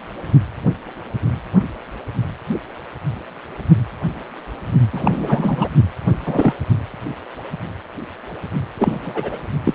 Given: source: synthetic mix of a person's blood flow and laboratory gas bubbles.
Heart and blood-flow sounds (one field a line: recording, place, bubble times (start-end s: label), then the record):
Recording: Doppler ultrasound of blood flow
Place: precordium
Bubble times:
4.93-5.69 s: bubbles
6.25-6.54 s: bubbles
8.79-9.39 s: bubbles
9.64-9.75 s: bubbles
From the record:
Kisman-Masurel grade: 223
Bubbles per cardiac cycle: several, 3 to 8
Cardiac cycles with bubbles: 10 to 50%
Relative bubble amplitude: loud (0.450 to 0.775)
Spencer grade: 2 (many but less than half of the cardiac periods contain bubble signals, singularly or in groups)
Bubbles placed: only in the low amplitude regions of the cardiac cycle